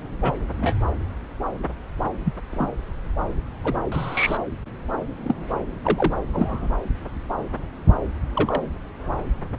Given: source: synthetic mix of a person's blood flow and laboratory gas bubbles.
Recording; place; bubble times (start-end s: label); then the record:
Doppler ultrasound of blood flow; subclavian vein
0.22-0.31 s: bubbles
0.57-0.73 s: bubbles
2.25-2.34 s: bubbles
2.52-2.68 s: bubbles
3.64-3.74 s: bubbles
3.92-4.37 s: bubbles
5.24-5.34 s: bubbles
5.83-6.13 s: bubbles
6.32-6.69 s: bubbles
8.35-8.61 s: bubbles
From the record:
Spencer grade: 2 (many but less than half of the cardiac periods contain bubble signals, singularly or in groups); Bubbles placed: anywhere in the cardiac cycle